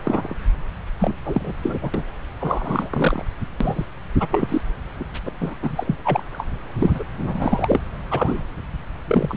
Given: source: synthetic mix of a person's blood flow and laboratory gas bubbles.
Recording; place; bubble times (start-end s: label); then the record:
Doppler ultrasound of blood flow; subclavian vein
0.02-0.36 s: bubbles
1.00-1.15 s: bubbles
1.25-1.54 s: bubbles
1.62-1.79 s: bubbles
1.81-1.91 s: bubbles
1.94-2.03 s: bubbles
2.40-3.25 s: bubbles
3.60-3.85 s: bubbles
4.20-4.28 s: bubbles
4.30-4.61 s: bubbles
5.00-5.04 s: bubbles
5.13-5.20 s: bubbles
5.25-5.31 s: bubbles
5.40-5.54 s: bubbles
5.62-5.96 s: bubbles
6.04-6.23 s: bubbles
6.32-6.46 s: bubbles
6.79-7.04 s: bubbles
7.17-7.81 s: bubbles
8.10-8.41 s: bubbles
9.08-9.37 s: bubbles
From the record:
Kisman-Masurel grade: 342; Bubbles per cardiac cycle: rolling drumbeat, 9 or more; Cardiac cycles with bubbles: 100%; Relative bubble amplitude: moderate (0.250 to 0.450); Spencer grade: 3 (all of the cardiac periods contain showers or single bubble signals, but not dominating or overriding the cardiac motion signals); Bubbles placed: anywhere in the cardiac cycle